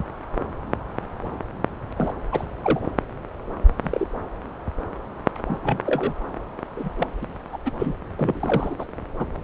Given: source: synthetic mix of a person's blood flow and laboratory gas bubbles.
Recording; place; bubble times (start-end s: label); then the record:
Doppler ultrasound of blood flow; subclavian vein
1.96-2.14 s: bubbles
2.31-2.45 s: bubbles
2.63-2.80 s: bubbles
3.84-4.08 s: bubbles
5.45-5.59 s: bubbles
5.62-5.78 s: bubbles
5.85-6.13 s: bubbles
6.75-6.89 s: bubbles
6.97-7.07 s: bubbles
7.21-7.26 s: bubbles
7.52-7.58 s: bubbles
7.65-7.70 s: bubbles
7.78-7.94 s: bubbles
8.19-8.76 s: bubbles
8.79-8.85 s: bubbles
9.19-9.27 s: bubbles
From the record:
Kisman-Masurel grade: 232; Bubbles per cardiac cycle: several, 3 to 8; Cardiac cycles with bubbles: 50 to 99%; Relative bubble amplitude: moderate (0.250 to 0.450); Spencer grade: 3 (all of the cardiac periods contain showers or single bubble signals, but not dominating or overriding the cardiac motion signals); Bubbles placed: anywhere in the cardiac cycle